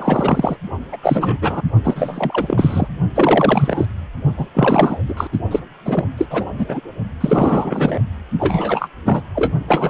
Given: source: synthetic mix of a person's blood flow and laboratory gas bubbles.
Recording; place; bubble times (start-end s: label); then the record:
Doppler ultrasound of blood flow; precordium
0.00-0.57 s: bubbles
0.92-0.97 s: bubbles
1.02-1.39 s: bubbles
1.41-1.62 s: bubbles
1.83-2.88 s: bubbles
3.15-3.85 s: bubbles
4.37-4.47 s: bubbles
4.54-4.98 s: bubbles
5.08-5.14 s: bubbles
5.17-5.27 s: bubbles
5.32-5.40 s: bubbles
5.51-5.60 s: bubbles
5.86-6.04 s: bubbles
6.17-6.26 s: bubbles
6.30-6.46 s: bubbles
6.58-6.66 s: bubbles
6.68-6.80 s: bubbles
7.20-8.00 s: bubbles
8.39-8.88 s: bubbles
9.04-9.22 s: bubbles
9.35-9.52 s: bubbles
9.68-9.90 s: bubbles
From the record:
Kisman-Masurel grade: 343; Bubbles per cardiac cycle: rolling drumbeat, 9 or more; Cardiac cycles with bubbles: 100%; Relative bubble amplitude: loud (0.450 to 0.775); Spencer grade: 3 (all of the cardiac periods contain showers or single bubble signals, but not dominating or overriding the cardiac motion signals); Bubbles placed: only in the low amplitude regions of the cardiac cycle